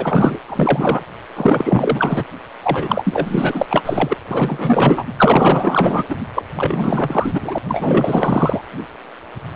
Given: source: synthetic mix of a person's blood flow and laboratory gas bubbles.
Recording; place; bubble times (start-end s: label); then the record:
Doppler ultrasound of blood flow; precordium
0.00-0.39 s: bubbles
0.48-1.02 s: bubbles
1.36-2.25 s: bubbles
2.62-3.66 s: bubbles
3.70-3.82 s: bubbles
3.85-4.17 s: bubbles
4.30-5.04 s: bubbles
5.17-6.04 s: bubbles
6.09-6.16 s: bubbles
6.35-6.43 s: bubbles
6.56-7.58 s: bubbles
7.69-8.62 s: bubbles
From the record:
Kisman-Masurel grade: 444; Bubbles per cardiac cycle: continuous sound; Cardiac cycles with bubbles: 100%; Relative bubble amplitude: maximal (0.775 to 0.999); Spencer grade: 4 (maximum detectable bubble signal sounding continuously throughout systole and diastole of every cardiac period, and overriding the amplitude of the normal cardiac signals); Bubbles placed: anywhere in the cardiac cycle